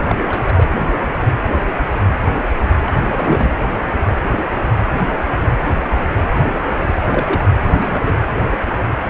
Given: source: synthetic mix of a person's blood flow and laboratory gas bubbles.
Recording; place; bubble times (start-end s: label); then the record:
Doppler ultrasound of blood flow; precordium
0.08-0.16 s: bubbles
0.28-0.70 s: bubbles
2.86-3.53 s: bubbles
7.05-7.47 s: bubbles
7.73-8.13 s: bubbles
From the record:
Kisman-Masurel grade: 222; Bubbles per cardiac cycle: several, 3 to 8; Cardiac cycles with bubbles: 10 to 50%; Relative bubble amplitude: moderate (0.250 to 0.450); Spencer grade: 2 (many but less than half of the cardiac periods contain bubble signals, singularly or in groups); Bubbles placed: anywhere in the cardiac cycle